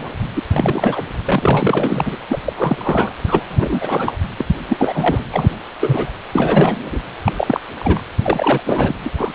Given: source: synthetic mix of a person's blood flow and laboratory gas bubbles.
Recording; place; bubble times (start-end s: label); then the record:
Doppler ultrasound of blood flow; precordium
0.00-0.09 s: bubbles
0.36-0.42 s: bubbles
0.56-1.02 s: bubbles
1.25-2.17 s: bubbles
2.29-2.38 s: bubbles
2.44-2.53 s: bubbles
2.56-3.12 s: bubbles
3.27-4.17 s: bubbles
4.38-4.46 s: bubbles
4.69-5.25 s: bubbles
5.31-5.56 s: bubbles
5.80-6.10 s: bubbles
6.32-7.01 s: bubbles
7.24-7.33 s: bubbles
7.36-7.60 s: bubbles
7.80-8.01 s: bubbles
8.22-8.60 s: bubbles
8.65-9.09 s: bubbles
9.17-9.32 s: bubbles
From the record:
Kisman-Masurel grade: 343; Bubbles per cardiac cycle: rolling drumbeat, 9 or more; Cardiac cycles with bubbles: 100%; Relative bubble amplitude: loud (0.450 to 0.775); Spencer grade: 3 (all of the cardiac periods contain showers or single bubble signals, but not dominating or overriding the cardiac motion signals); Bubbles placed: anywhere in the cardiac cycle